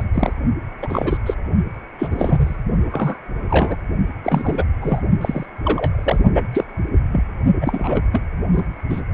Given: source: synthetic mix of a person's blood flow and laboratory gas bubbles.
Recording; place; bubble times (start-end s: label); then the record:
Doppler ultrasound of blood flow; precordium
0.00-0.04 s: bubbles
0.14-0.33 s: bubbles
0.82-1.17 s: bubbles
1.26-1.34 s: bubbles
1.98-2.56 s: bubbles
2.92-3.19 s: bubbles
3.50-3.78 s: bubbles
4.24-4.63 s: bubbles
4.81-5.00 s: bubbles
5.21-5.46 s: bubbles
5.63-6.24 s: bubbles
6.34-6.49 s: bubbles
6.53-6.64 s: bubbles
7.12-7.22 s: bubbles
7.61-8.02 s: bubbles
8.12-8.23 s: bubbles
8.53-8.63 s: bubbles
8.90-9.01 s: bubbles
From the record:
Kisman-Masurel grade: 242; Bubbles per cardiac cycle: several, 3 to 8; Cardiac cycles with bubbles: 100%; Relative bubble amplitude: moderate (0.250 to 0.450); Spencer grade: 3 (all of the cardiac periods contain showers or single bubble signals, but not dominating or overriding the cardiac motion signals); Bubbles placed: only in the low amplitude regions of the cardiac cycle